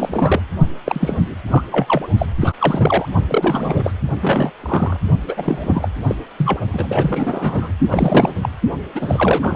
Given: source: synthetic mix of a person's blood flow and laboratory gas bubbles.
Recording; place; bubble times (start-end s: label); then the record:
Doppler ultrasound of blood flow; precordium
0.00-0.40 s: bubbles
0.85-1.35 s: bubbles
1.47-1.64 s: bubbles
1.72-2.09 s: bubbles
2.18-2.26 s: bubbles
2.40-2.54 s: bubbles
2.59-3.06 s: bubbles
3.28-3.92 s: bubbles
4.21-4.51 s: bubbles
4.62-4.96 s: bubbles
5.27-5.88 s: bubbles
6.03-6.15 s: bubbles
6.37-6.59 s: bubbles
6.72-7.72 s: bubbles
7.90-8.34 s: bubbles
8.42-8.49 s: bubbles
8.95-9.56 s: bubbles
From the record:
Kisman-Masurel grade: 342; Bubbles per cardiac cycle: rolling drumbeat, 9 or more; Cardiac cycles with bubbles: 100%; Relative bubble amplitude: moderate (0.250 to 0.450); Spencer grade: 3 (all of the cardiac periods contain showers or single bubble signals, but not dominating or overriding the cardiac motion signals); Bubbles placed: only in the low amplitude regions of the cardiac cycle